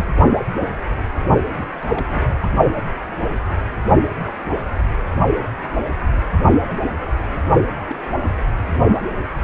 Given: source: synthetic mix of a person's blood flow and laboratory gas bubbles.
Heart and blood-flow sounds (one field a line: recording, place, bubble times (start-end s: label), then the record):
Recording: Doppler ultrasound of blood flow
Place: precordium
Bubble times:
0.00-0.04 s: bubbles
1.58-1.64 s: bubbles
1.82-2.06 s: bubbles
2.08-2.36 s: bubbles
2.43-2.47 s: bubbles
6.69-6.75 s: bubbles
7.07-7.13 s: bubbles
7.21-7.25 s: bubbles
7.89-7.96 s: bubbles
8.21-8.27 s: bubbles
8.65-8.77 s: bubbles
From the record:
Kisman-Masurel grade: 221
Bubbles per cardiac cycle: several, 3 to 8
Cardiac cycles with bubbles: 10 to 50%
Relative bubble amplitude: barely perceptible (0.100 to 0.250)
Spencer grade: 2 (many but less than half of the cardiac periods contain bubble signals, singularly or in groups)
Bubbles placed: only in the low amplitude regions of the cardiac cycle